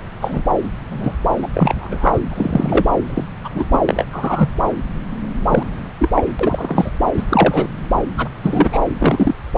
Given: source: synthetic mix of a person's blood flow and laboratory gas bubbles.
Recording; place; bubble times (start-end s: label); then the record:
Doppler ultrasound of blood flow; subclavian vein
0.21-0.43 s: bubbles
0.90-1.16 s: bubbles
1.42-1.48 s: bubbles
1.53-2.21 s: bubbles
2.31-2.86 s: bubbles
3.10-3.25 s: bubbles
3.44-3.50 s: bubbles
3.54-3.66 s: bubbles
3.71-3.81 s: bubbles
3.89-4.04 s: bubbles
4.12-4.49 s: bubbles
5.49-5.63 s: bubbles
5.99-6.10 s: bubbles
6.15-6.24 s: bubbles
6.39-6.92 s: bubbles
7.17-7.23 s: bubbles
7.29-7.70 s: bubbles
8.17-8.29 s: bubbles
8.43-8.79 s: bubbles
8.98-9.35 s: bubbles
From the record:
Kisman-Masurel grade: 233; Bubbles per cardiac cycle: several, 3 to 8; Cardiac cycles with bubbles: 50 to 99%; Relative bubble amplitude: loud (0.450 to 0.775); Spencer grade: 3 (all of the cardiac periods contain showers or single bubble signals, but not dominating or overriding the cardiac motion signals); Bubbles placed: anywhere in the cardiac cycle